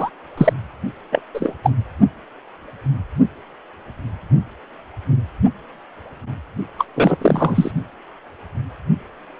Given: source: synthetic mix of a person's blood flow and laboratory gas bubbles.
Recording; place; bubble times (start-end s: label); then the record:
Doppler ultrasound of blood flow; precordium
0.00-0.10 s: bubbles
0.37-0.53 s: bubbles
1.12-1.22 s: bubbles
1.34-1.54 s: bubbles
1.64-1.71 s: bubbles
6.78-6.85 s: bubbles
6.96-7.18 s: bubbles
7.21-7.71 s: bubbles
From the record:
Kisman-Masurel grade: 223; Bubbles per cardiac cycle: several, 3 to 8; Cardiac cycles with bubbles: 10 to 50%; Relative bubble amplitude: loud (0.450 to 0.775); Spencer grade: 2 (many but less than half of the cardiac periods contain bubble signals, singularly or in groups); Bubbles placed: only in the low amplitude regions of the cardiac cycle